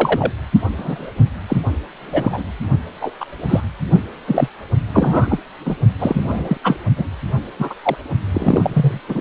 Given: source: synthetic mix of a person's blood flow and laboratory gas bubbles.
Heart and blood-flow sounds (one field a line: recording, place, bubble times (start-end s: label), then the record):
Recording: Doppler ultrasound of blood flow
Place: precordium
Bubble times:
0.00-0.32 s: bubbles
0.77-1.11 s: bubbles
1.48-1.63 s: bubbles
2.04-2.43 s: bubbles
3.01-3.12 s: bubbles
3.20-3.26 s: bubbles
3.49-3.61 s: bubbles
4.27-4.48 s: bubbles
4.93-5.38 s: bubbles
5.65-5.76 s: bubbles
6.00-6.58 s: bubbles
6.63-6.75 s: bubbles
6.96-7.05 s: bubbles
7.58-7.74 s: bubbles
7.83-7.96 s: bubbles
8.33-9.00 s: bubbles
9.08-9.21 s: bubbles
From the record:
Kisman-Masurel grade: 233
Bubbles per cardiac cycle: several, 3 to 8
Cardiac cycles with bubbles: 50 to 99%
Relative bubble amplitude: loud (0.450 to 0.775)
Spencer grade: 3 (all of the cardiac periods contain showers or single bubble signals, but not dominating or overriding the cardiac motion signals)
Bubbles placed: only in the low amplitude regions of the cardiac cycle